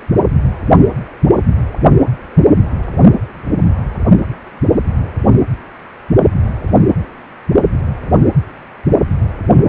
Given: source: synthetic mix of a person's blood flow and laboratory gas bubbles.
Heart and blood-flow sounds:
Doppler ultrasound of blood flow; precordium
no bubbles
From the record:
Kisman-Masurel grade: 000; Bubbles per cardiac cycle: 0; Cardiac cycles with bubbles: 0%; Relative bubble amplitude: no bubbles discernible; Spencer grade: 0 (complete lack of bubble signals)

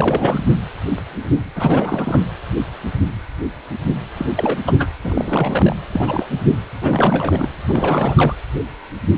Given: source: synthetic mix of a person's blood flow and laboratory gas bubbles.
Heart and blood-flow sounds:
Doppler ultrasound of blood flow; precordium
0.00-0.43 s: bubbles
1.56-2.27 s: bubbles
4.17-4.26 s: bubbles
4.36-4.58 s: bubbles
4.65-4.88 s: bubbles
5.03-5.75 s: bubbles
5.92-6.27 s: bubbles
6.30-6.40 s: bubbles
6.81-7.48 s: bubbles
7.68-8.36 s: bubbles
From the record:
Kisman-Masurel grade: 332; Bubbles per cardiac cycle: rolling drumbeat, 9 or more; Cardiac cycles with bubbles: 50 to 99%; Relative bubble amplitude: moderate (0.250 to 0.450); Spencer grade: 3 (all of the cardiac periods contain showers or single bubble signals, but not dominating or overriding the cardiac motion signals); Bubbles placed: anywhere in the cardiac cycle

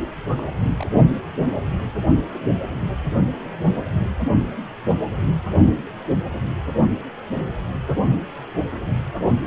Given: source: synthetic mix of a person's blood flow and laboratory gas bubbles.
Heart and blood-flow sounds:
Doppler ultrasound of blood flow; precordium
0.37-0.86 s: bubbles
From the record:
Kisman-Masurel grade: 111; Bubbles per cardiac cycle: 1 to 2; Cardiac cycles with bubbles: 1 to 10%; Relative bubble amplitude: barely perceptible (0.100 to 0.250); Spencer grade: 1 (occasional bubble signal discernible with the cardiac motion signal, with majority of cardiac periods free of bubbles); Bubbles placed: only in the low amplitude regions of the cardiac cycle

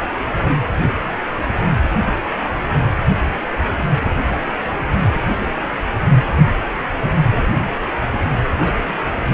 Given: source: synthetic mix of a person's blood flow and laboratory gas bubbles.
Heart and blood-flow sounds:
Doppler ultrasound of blood flow; precordium
8.62-9.34 s: bubbles
From the record:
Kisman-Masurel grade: 211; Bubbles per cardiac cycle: several, 3 to 8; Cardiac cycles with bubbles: 1 to 10%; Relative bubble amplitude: barely perceptible (0.100 to 0.250); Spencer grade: 1 (occasional bubble signal discernible with the cardiac motion signal, with majority of cardiac periods free of bubbles); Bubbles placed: anywhere in the cardiac cycle

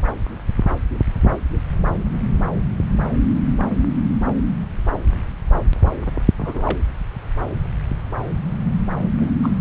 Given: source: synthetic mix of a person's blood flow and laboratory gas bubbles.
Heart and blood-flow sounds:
Doppler ultrasound of blood flow; subclavian vein
6.39-6.78 s: bubbles
9.20-9.29 s: bubbles
9.42-9.52 s: bubbles
From the record:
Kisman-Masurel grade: 112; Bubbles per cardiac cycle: 1 to 2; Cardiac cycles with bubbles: 1 to 10%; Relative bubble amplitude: moderate (0.250 to 0.450); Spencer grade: 1 (occasional bubble signal discernible with the cardiac motion signal, with majority of cardiac periods free of bubbles); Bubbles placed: anywhere in the cardiac cycle

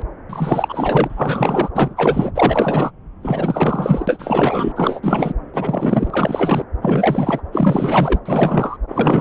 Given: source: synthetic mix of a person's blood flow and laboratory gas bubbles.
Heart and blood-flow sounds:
Doppler ultrasound of blood flow; subclavian vein
0.00-0.04 s: bubbles
0.29-1.71 s: bubbles
1.74-2.31 s: bubbles
2.35-2.91 s: bubbles
3.22-4.72 s: bubbles
4.75-5.00 s: bubbles
5.03-5.33 s: bubbles
5.54-6.65 s: bubbles
6.81-7.41 s: bubbles
7.52-8.19 s: bubbles
8.25-8.77 s: bubbles
8.88-9.21 s: bubbles
From the record:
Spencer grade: 4 (maximum detectable bubble signal sounding continuously throughout systole and diastole of every cardiac period, and overriding the amplitude of the normal cardiac signals); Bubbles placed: anywhere in the cardiac cycle

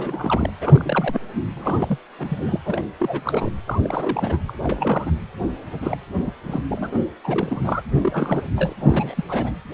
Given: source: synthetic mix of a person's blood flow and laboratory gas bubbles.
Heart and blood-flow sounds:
Doppler ultrasound of blood flow; precordium
0.00-0.52 s: bubbles
0.60-1.21 s: bubbles
1.55-1.99 s: bubbles
2.18-2.59 s: bubbles
2.65-2.82 s: bubbles
2.98-3.52 s: bubbles
3.67-4.38 s: bubbles
4.47-5.12 s: bubbles
5.81-5.97 s: bubbles
6.25-6.33 s: bubbles
6.43-6.62 s: bubbles
6.68-6.98 s: bubbles
7.23-7.83 s: bubbles
8.02-8.44 s: bubbles
8.57-8.74 s: bubbles
8.79-9.24 s: bubbles
9.28-9.53 s: bubbles
From the record:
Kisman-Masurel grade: 342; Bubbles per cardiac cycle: rolling drumbeat, 9 or more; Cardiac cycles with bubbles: 100%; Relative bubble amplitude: moderate (0.250 to 0.450); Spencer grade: 3 (all of the cardiac periods contain showers or single bubble signals, but not dominating or overriding the cardiac motion signals); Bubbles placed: anywhere in the cardiac cycle

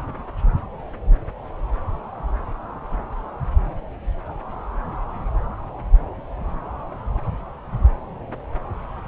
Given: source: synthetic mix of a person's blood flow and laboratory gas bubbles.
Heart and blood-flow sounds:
Doppler ultrasound of blood flow; subclavian vein
no bubbles
From the record:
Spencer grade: 0 (complete lack of bubble signals)

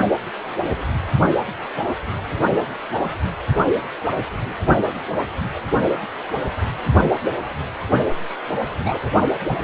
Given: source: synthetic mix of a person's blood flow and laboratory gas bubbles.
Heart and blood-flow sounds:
Doppler ultrasound of blood flow; precordium
8.84-9.10 s: bubbles
9.49-9.57 s: bubbles
From the record:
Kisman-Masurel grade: 112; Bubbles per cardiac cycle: 1 to 2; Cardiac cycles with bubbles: 1 to 10%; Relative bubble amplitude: moderate (0.250 to 0.450); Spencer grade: 1 (occasional bubble signal discernible with the cardiac motion signal, with majority of cardiac periods free of bubbles); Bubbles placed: only in the low amplitude regions of the cardiac cycle

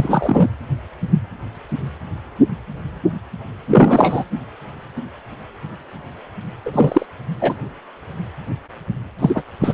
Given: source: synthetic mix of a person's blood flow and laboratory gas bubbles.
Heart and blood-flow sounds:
Doppler ultrasound of blood flow; precordium
0.00-0.50 s: bubbles
3.69-4.24 s: bubbles
6.66-7.06 s: bubbles
7.41-7.54 s: bubbles
9.19-9.42 s: bubbles
9.61-9.73 s: bubbles
From the record:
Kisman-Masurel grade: 223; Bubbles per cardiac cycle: several, 3 to 8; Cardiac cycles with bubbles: 10 to 50%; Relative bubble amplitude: loud (0.450 to 0.775); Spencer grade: 2 (many but less than half of the cardiac periods contain bubble signals, singularly or in groups); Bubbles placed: anywhere in the cardiac cycle

